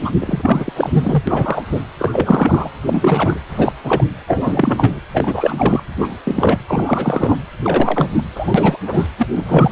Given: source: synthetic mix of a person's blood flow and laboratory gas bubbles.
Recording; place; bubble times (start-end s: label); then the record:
Doppler ultrasound of blood flow; precordium
0.00-0.11 s: bubbles
0.21-0.73 s: bubbles
0.76-0.90 s: bubbles
0.92-1.24 s: bubbles
1.27-1.62 s: bubbles
1.72-1.81 s: bubbles
1.99-2.69 s: bubbles
2.85-3.40 s: bubbles
3.49-3.72 s: bubbles
3.83-4.04 s: bubbles
4.27-5.00 s: bubbles
5.13-5.83 s: bubbles
5.96-6.17 s: bubbles
6.25-6.58 s: bubbles
6.67-7.37 s: bubbles
7.63-8.23 s: bubbles
8.35-8.77 s: bubbles
8.85-9.08 s: bubbles
9.19-9.27 s: bubbles
9.34-9.72 s: bubbles
From the record:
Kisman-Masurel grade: 343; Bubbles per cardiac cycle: rolling drumbeat, 9 or more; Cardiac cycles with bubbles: 100%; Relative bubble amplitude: loud (0.450 to 0.775); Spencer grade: 3 (all of the cardiac periods contain showers or single bubble signals, but not dominating or overriding the cardiac motion signals); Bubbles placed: anywhere in the cardiac cycle